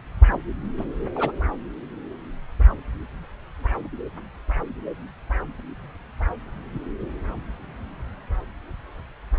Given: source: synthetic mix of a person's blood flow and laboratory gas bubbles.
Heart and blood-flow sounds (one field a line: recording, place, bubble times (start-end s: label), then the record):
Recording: Doppler ultrasound of blood flow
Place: subclavian vein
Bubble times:
0.78-0.85 s: bubbles
1.15-1.31 s: bubbles
From the record:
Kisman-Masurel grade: 112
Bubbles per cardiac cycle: 1 to 2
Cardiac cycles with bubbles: 1 to 10%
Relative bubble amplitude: moderate (0.250 to 0.450)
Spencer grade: 1 (occasional bubble signal discernible with the cardiac motion signal, with majority of cardiac periods free of bubbles)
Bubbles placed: anywhere in the cardiac cycle